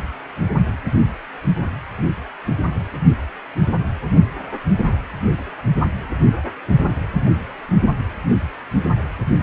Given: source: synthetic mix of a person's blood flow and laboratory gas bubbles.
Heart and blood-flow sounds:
Doppler ultrasound of blood flow; precordium
no bubbles
From the record:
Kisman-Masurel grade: 000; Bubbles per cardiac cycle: 0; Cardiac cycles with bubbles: 0%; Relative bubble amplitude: no bubbles discernible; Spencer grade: 0 (complete lack of bubble signals)

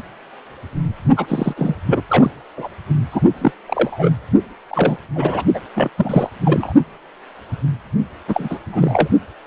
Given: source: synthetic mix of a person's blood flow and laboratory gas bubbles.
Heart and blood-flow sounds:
Doppler ultrasound of blood flow; precordium
1.16-1.54 s: bubbles
1.56-1.75 s: bubbles
1.87-2.03 s: bubbles
2.09-2.31 s: bubbles
2.57-2.67 s: bubbles
3.12-3.21 s: bubbles
3.41-3.52 s: bubbles
3.67-4.11 s: bubbles
4.71-4.96 s: bubbles
5.16-5.43 s: bubbles
5.54-5.61 s: bubbles
5.75-5.89 s: bubbles
5.97-6.30 s: bubbles
6.45-6.72 s: bubbles
8.28-8.59 s: bubbles
8.69-9.09 s: bubbles
From the record:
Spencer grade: 3 (all of the cardiac periods contain showers or single bubble signals, but not dominating or overriding the cardiac motion signals); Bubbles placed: only in the low amplitude regions of the cardiac cycle

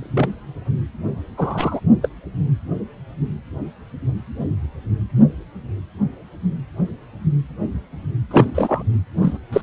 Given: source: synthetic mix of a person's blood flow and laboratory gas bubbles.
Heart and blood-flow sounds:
Doppler ultrasound of blood flow; precordium
0.00-0.31 s: bubbles
1.36-1.80 s: bubbles
2.02-2.08 s: bubbles
8.30-8.50 s: bubbles
8.54-8.84 s: bubbles
9.17-9.38 s: bubbles
9.53-9.61 s: bubbles
From the record:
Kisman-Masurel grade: 223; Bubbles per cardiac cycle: several, 3 to 8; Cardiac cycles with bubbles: 10 to 50%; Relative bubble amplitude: loud (0.450 to 0.775); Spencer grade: 2 (many but less than half of the cardiac periods contain bubble signals, singularly or in groups); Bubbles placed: anywhere in the cardiac cycle

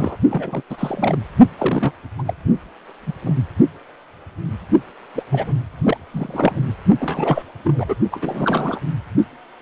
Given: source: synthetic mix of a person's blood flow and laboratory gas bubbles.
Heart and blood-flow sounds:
Doppler ultrasound of blood flow; precordium
0.00-0.17 s: bubbles
0.28-0.62 s: bubbles
0.70-1.17 s: bubbles
1.58-1.92 s: bubbles
2.19-2.23 s: bubbles
2.25-2.33 s: bubbles
3.06-3.13 s: bubbles
3.22-3.35 s: bubbles
5.15-5.22 s: bubbles
5.30-5.57 s: bubbles
5.83-5.97 s: bubbles
6.13-6.66 s: bubbles
7.00-7.42 s: bubbles
7.64-7.95 s: bubbles
8.11-8.80 s: bubbles
From the record:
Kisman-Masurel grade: 332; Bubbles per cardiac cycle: rolling drumbeat, 9 or more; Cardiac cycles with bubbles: 50 to 99%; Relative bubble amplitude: moderate (0.250 to 0.450); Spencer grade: 3 (all of the cardiac periods contain showers or single bubble signals, but not dominating or overriding the cardiac motion signals); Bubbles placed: only in the low amplitude regions of the cardiac cycle

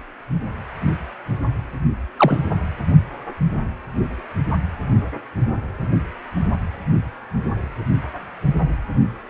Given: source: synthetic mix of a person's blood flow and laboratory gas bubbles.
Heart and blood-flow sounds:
Doppler ultrasound of blood flow; precordium
2.17-2.42 s: bubbles
From the record:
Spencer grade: 1 (occasional bubble signal discernible with the cardiac motion signal, with majority of cardiac periods free of bubbles); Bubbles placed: anywhere in the cardiac cycle

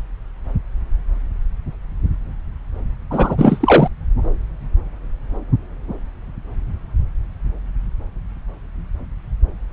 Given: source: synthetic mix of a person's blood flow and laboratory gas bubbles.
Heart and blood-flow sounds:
Doppler ultrasound of blood flow; subclavian vein
3.10-3.88 s: bubbles
From the record:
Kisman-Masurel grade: 213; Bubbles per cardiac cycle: several, 3 to 8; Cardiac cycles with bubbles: 1 to 10%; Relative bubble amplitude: loud (0.450 to 0.775); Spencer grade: 1 (occasional bubble signal discernible with the cardiac motion signal, with majority of cardiac periods free of bubbles); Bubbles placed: anywhere in the cardiac cycle

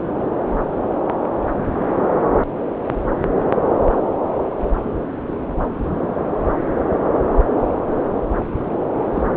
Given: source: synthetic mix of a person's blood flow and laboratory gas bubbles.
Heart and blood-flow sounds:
Doppler ultrasound of blood flow; subclavian vein
9.15-9.25 s: bubbles
From the record:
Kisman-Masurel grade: 112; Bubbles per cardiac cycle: 1 to 2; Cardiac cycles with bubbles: 1 to 10%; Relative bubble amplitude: moderate (0.250 to 0.450); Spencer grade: 1 (occasional bubble signal discernible with the cardiac motion signal, with majority of cardiac periods free of bubbles); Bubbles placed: anywhere in the cardiac cycle

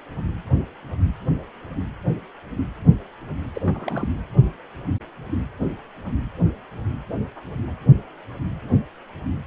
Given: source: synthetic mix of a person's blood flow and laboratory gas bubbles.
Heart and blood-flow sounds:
Doppler ultrasound of blood flow; precordium
3.54-3.62 s: bubbles
3.64-4.08 s: bubbles
From the record:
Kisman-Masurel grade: 211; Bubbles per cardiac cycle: several, 3 to 8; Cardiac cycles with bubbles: 1 to 10%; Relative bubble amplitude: barely perceptible (0.100 to 0.250); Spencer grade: 1 (occasional bubble signal discernible with the cardiac motion signal, with majority of cardiac periods free of bubbles); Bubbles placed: anywhere in the cardiac cycle

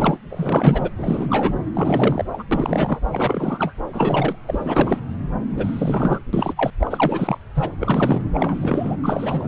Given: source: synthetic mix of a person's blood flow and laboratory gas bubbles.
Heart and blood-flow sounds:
Doppler ultrasound of blood flow; subclavian vein
0.00-0.19 s: bubbles
0.30-0.91 s: bubbles
0.97-1.58 s: bubbles
1.74-2.25 s: bubbles
2.33-2.43 s: bubbles
2.51-3.00 s: bubbles
3.12-3.74 s: bubbles
3.93-4.36 s: bubbles
4.47-4.98 s: bubbles
5.55-6.20 s: bubbles
6.33-6.54 s: bubbles
6.57-6.71 s: bubbles
6.79-7.38 s: bubbles
7.54-7.76 s: bubbles
7.79-8.21 s: bubbles
8.34-8.96 s: bubbles
9.03-9.48 s: bubbles
From the record:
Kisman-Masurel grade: 343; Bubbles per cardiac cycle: rolling drumbeat, 9 or more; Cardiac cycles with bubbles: 100%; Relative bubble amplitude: loud (0.450 to 0.775); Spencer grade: 3 (all of the cardiac periods contain showers or single bubble signals, but not dominating or overriding the cardiac motion signals); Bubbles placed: anywhere in the cardiac cycle

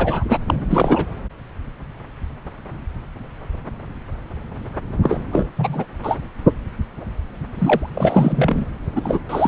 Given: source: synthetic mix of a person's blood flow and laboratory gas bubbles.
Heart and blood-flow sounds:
Doppler ultrasound of blood flow; subclavian vein
0.00-0.24 s: bubbles
0.28-0.38 s: bubbles
0.46-1.06 s: bubbles
5.02-5.21 s: bubbles
5.32-5.49 s: bubbles
5.58-5.85 s: bubbles
6.03-6.15 s: bubbles
7.58-7.89 s: bubbles
7.94-8.68 s: bubbles
8.95-9.19 s: bubbles
9.29-9.48 s: bubbles
From the record:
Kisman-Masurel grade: 333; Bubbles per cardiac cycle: rolling drumbeat, 9 or more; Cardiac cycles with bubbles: 50 to 99%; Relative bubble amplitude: loud (0.450 to 0.775); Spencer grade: 3 (all of the cardiac periods contain showers or single bubble signals, but not dominating or overriding the cardiac motion signals); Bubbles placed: anywhere in the cardiac cycle

